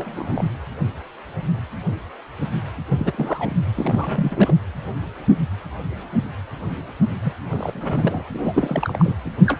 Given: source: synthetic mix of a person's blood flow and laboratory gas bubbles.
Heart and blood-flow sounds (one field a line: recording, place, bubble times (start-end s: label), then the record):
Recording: Doppler ultrasound of blood flow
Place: precordium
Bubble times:
0.00-0.50 s: bubbles
2.90-3.52 s: bubbles
3.74-4.54 s: bubbles
7.22-7.33 s: bubbles
7.50-8.25 s: bubbles
8.33-9.17 s: bubbles
9.25-9.32 s: bubbles
9.46-9.59 s: bubbles
From the record:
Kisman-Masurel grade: 332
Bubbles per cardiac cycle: rolling drumbeat, 9 or more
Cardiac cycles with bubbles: 50 to 99%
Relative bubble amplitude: moderate (0.250 to 0.450)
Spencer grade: 3 (all of the cardiac periods contain showers or single bubble signals, but not dominating or overriding the cardiac motion signals)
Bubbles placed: anywhere in the cardiac cycle